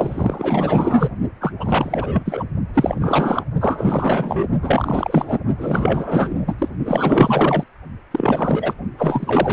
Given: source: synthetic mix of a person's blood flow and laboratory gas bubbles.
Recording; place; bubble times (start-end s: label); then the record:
Doppler ultrasound of blood flow; precordium
0.00-1.09 s: bubbles
1.40-1.52 s: bubbles
1.58-2.44 s: bubbles
2.73-3.44 s: bubbles
3.60-4.48 s: bubbles
4.62-5.39 s: bubbles
5.58-6.55 s: bubbles
6.58-6.69 s: bubbles
6.85-7.64 s: bubbles
8.11-8.74 s: bubbles
8.97-9.53 s: bubbles
From the record:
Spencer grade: 4 (maximum detectable bubble signal sounding continuously throughout systole and diastole of every cardiac period, and overriding the amplitude of the normal cardiac signals); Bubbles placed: only in the low amplitude regions of the cardiac cycle